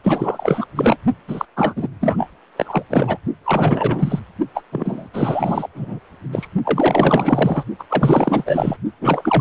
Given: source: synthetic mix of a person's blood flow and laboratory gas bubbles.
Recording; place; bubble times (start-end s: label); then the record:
Doppler ultrasound of blood flow; precordium
0.04-0.66 s: bubbles
0.75-0.97 s: bubbles
1.28-1.45 s: bubbles
1.56-1.88 s: bubbles
2.00-2.29 s: bubbles
2.56-2.83 s: bubbles
2.89-3.17 s: bubbles
3.44-4.21 s: bubbles
4.54-4.64 s: bubbles
4.71-5.08 s: bubbles
5.13-5.68 s: bubbles
5.75-6.00 s: bubbles
6.32-6.47 s: bubbles
6.65-7.63 s: bubbles
7.79-7.84 s: bubbles
7.90-8.77 s: bubbles
9.00-9.41 s: bubbles
From the record:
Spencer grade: 4 (maximum detectable bubble signal sounding continuously throughout systole and diastole of every cardiac period, and overriding the amplitude of the normal cardiac signals); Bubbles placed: only in the low amplitude regions of the cardiac cycle